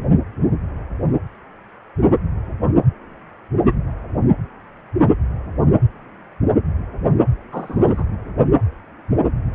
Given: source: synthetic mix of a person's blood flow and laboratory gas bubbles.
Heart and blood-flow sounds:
Doppler ultrasound of blood flow; precordium
7.52-8.05 s: bubbles
From the record:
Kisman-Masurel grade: 112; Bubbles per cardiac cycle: 1 to 2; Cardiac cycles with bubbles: 1 to 10%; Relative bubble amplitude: moderate (0.250 to 0.450); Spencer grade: 1 (occasional bubble signal discernible with the cardiac motion signal, with majority of cardiac periods free of bubbles); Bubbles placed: anywhere in the cardiac cycle

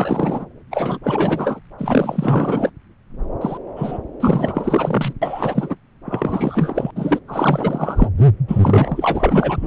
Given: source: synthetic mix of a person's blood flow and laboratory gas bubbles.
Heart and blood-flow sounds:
Doppler ultrasound of blood flow; subclavian vein
0.00-0.46 s: bubbles
0.71-0.98 s: bubbles
1.03-1.59 s: bubbles
1.78-2.71 s: bubbles
3.41-3.58 s: bubbles
3.76-3.99 s: bubbles
4.20-5.13 s: bubbles
5.21-5.75 s: bubbles
6.05-6.91 s: bubbles
6.96-7.19 s: bubbles
7.28-8.09 s: bubbles
8.18-8.26 s: bubbles
8.48-9.67 s: bubbles
From the record:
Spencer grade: 4 (maximum detectable bubble signal sounding continuously throughout systole and diastole of every cardiac period, and overriding the amplitude of the normal cardiac signals); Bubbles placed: anywhere in the cardiac cycle

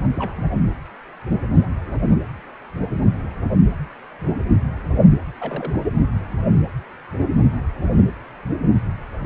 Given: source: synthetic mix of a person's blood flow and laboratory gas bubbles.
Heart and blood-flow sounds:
Doppler ultrasound of blood flow; precordium
0.13-0.34 s: bubbles
0.37-0.46 s: bubbles
5.40-5.93 s: bubbles
From the record:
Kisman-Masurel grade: 211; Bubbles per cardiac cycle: several, 3 to 8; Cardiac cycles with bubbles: 1 to 10%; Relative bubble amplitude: barely perceptible (0.100 to 0.250); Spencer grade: 1 (occasional bubble signal discernible with the cardiac motion signal, with majority of cardiac periods free of bubbles); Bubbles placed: anywhere in the cardiac cycle

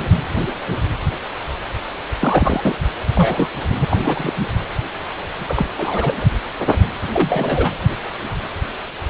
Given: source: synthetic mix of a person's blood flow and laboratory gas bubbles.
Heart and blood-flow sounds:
Doppler ultrasound of blood flow; precordium
2.13-2.75 s: bubbles
3.15-3.49 s: bubbles
3.79-4.33 s: bubbles
4.37-4.45 s: bubbles
5.39-5.68 s: bubbles
5.77-6.25 s: bubbles
7.12-7.72 s: bubbles
From the record:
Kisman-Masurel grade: 223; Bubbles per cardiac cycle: several, 3 to 8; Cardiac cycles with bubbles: 10 to 50%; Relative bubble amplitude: loud (0.450 to 0.775); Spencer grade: 2 (many but less than half of the cardiac periods contain bubble signals, singularly or in groups); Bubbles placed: anywhere in the cardiac cycle

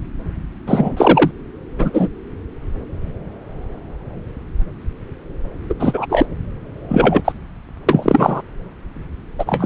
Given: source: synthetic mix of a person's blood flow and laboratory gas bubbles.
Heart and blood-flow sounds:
Doppler ultrasound of blood flow; subclavian vein
0.66-1.31 s: bubbles
1.79-2.08 s: bubbles
5.69-5.75 s: bubbles
5.79-6.06 s: bubbles
6.08-6.26 s: bubbles
6.88-7.32 s: bubbles
7.88-8.42 s: bubbles
9.38-9.66 s: bubbles
From the record:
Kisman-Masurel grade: 233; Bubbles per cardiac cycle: several, 3 to 8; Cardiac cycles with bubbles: 50 to 99%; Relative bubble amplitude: loud (0.450 to 0.775); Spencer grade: 3 (all of the cardiac periods contain showers or single bubble signals, but not dominating or overriding the cardiac motion signals); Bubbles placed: anywhere in the cardiac cycle

